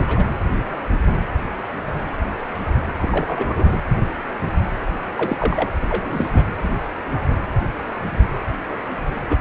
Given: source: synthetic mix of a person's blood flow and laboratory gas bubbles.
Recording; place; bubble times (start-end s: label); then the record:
Doppler ultrasound of blood flow; precordium
0.00-0.25 s: bubbles
2.97-3.78 s: bubbles
5.17-5.37 s: bubbles
5.39-5.68 s: bubbles
5.82-6.30 s: bubbles
6.33-6.45 s: bubbles
9.29-9.38 s: bubbles
From the record:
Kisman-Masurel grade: 222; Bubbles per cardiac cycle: several, 3 to 8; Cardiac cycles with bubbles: 10 to 50%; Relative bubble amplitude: moderate (0.250 to 0.450); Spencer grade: 2 (many but less than half of the cardiac periods contain bubble signals, singularly or in groups); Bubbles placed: anywhere in the cardiac cycle